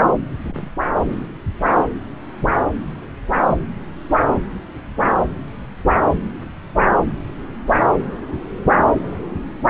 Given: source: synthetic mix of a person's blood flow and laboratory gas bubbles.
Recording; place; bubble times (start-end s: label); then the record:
Doppler ultrasound of blood flow; subclavian vein
0.46-0.61 s: bubbles
From the record:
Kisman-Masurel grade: 111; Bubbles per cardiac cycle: 1 to 2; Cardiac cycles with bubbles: 1 to 10%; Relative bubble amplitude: barely perceptible (0.100 to 0.250); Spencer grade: 1 (occasional bubble signal discernible with the cardiac motion signal, with majority of cardiac periods free of bubbles); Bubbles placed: anywhere in the cardiac cycle